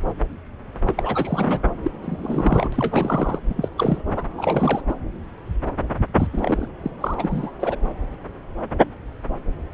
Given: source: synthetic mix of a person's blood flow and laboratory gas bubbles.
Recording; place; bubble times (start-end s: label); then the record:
Doppler ultrasound of blood flow; subclavian vein
0.87-1.60 s: bubbles
1.83-1.91 s: bubbles
2.02-2.69 s: bubbles
2.72-3.39 s: bubbles
3.49-3.69 s: bubbles
3.77-4.02 s: bubbles
4.15-4.23 s: bubbles
4.38-4.80 s: bubbles
4.88-4.95 s: bubbles
6.17-6.27 s: bubbles
6.30-6.67 s: bubbles
6.83-6.91 s: bubbles
7.00-7.14 s: bubbles
7.17-7.51 s: bubbles
7.59-7.76 s: bubbles
From the record:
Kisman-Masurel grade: 332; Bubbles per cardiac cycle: rolling drumbeat, 9 or more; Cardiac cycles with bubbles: 50 to 99%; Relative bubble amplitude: moderate (0.250 to 0.450); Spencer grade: 3 (all of the cardiac periods contain showers or single bubble signals, but not dominating or overriding the cardiac motion signals); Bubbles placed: anywhere in the cardiac cycle